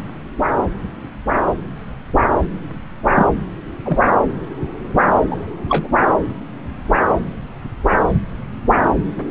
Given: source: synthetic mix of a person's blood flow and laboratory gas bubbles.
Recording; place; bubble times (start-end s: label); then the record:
Doppler ultrasound of blood flow; subclavian vein
3.15-3.27 s: bubbles
3.86-4.00 s: bubbles
5.30-5.36 s: bubbles
5.69-5.88 s: bubbles
From the record:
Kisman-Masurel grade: 123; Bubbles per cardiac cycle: 1 to 2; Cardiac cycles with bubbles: 10 to 50%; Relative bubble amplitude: loud (0.450 to 0.775); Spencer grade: 2 (many but less than half of the cardiac periods contain bubble signals, singularly or in groups); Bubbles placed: anywhere in the cardiac cycle